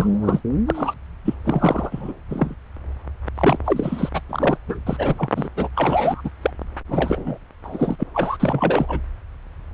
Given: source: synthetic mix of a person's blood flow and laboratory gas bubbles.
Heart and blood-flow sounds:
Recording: Doppler ultrasound of blood flow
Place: subclavian vein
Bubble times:
0.00-0.40 s: bubbles
0.67-0.94 s: bubbles
1.25-1.34 s: bubbles
1.44-2.13 s: bubbles
2.29-2.54 s: bubbles
3.35-3.58 s: bubbles
3.65-4.09 s: bubbles
4.14-4.21 s: bubbles
4.29-4.58 s: bubbles
4.68-4.79 s: bubbles
4.87-5.15 s: bubbles
5.19-5.29 s: bubbles
5.36-5.49 s: bubbles
5.57-5.69 s: bubbles
5.75-6.30 s: bubbles
6.42-6.50 s: bubbles
6.89-7.38 s: bubbles
7.64-7.96 s: bubbles
7.98-8.03 s: bubbles
8.14-8.37 s: bubbles
8.39-9.00 s: bubbles
From the record:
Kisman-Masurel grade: 342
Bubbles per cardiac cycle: rolling drumbeat, 9 or more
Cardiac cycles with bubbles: 100%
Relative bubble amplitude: moderate (0.250 to 0.450)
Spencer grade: 3 (all of the cardiac periods contain showers or single bubble signals, but not dominating or overriding the cardiac motion signals)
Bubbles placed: anywhere in the cardiac cycle

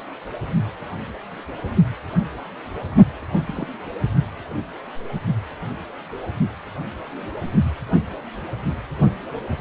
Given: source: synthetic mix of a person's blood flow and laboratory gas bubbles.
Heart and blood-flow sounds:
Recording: Doppler ultrasound of blood flow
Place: precordium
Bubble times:
3.46-3.67 s: bubbles
From the record:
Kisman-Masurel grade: 111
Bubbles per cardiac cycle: 1 to 2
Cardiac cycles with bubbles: 1 to 10%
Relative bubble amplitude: barely perceptible (0.100 to 0.250)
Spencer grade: 1 (occasional bubble signal discernible with the cardiac motion signal, with majority of cardiac periods free of bubbles)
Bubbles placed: anywhere in the cardiac cycle

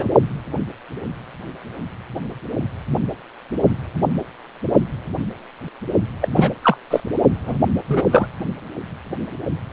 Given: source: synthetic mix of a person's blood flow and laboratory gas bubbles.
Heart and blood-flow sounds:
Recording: Doppler ultrasound of blood flow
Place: precordium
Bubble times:
0.00-0.09 s: bubbles
6.21-6.29 s: bubbles
6.35-6.50 s: bubbles
6.63-6.78 s: bubbles
6.90-7.00 s: bubbles
7.46-7.57 s: bubbles
7.88-8.02 s: bubbles
8.11-8.26 s: bubbles
From the record:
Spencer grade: 2 (many but less than half of the cardiac periods contain bubble signals, singularly or in groups)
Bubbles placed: only in the low amplitude regions of the cardiac cycle

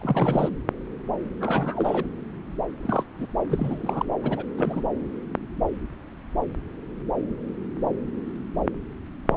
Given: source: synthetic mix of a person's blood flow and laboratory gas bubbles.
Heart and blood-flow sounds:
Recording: Doppler ultrasound of blood flow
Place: subclavian vein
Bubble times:
0.00-0.49 s: bubbles
1.41-2.05 s: bubbles
2.83-3.03 s: bubbles
3.17-3.26 s: bubbles
3.50-4.05 s: bubbles
4.23-4.44 s: bubbles
4.58-4.81 s: bubbles
9.28-9.37 s: bubbles
From the record:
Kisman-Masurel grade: 221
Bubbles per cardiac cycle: several, 3 to 8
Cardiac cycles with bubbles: 10 to 50%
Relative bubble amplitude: barely perceptible (0.100 to 0.250)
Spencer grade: 2 (many but less than half of the cardiac periods contain bubble signals, singularly or in groups)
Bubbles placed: anywhere in the cardiac cycle

